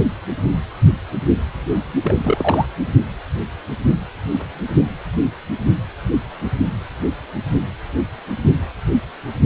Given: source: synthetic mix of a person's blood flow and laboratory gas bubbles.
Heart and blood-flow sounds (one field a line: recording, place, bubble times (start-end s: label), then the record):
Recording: Doppler ultrasound of blood flow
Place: precordium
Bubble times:
2.03-2.15 s: bubbles
2.24-2.66 s: bubbles
From the record:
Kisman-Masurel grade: 222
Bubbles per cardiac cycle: several, 3 to 8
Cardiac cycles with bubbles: 10 to 50%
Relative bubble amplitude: moderate (0.250 to 0.450)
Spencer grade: 2 (many but less than half of the cardiac periods contain bubble signals, singularly or in groups)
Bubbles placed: only in the low amplitude regions of the cardiac cycle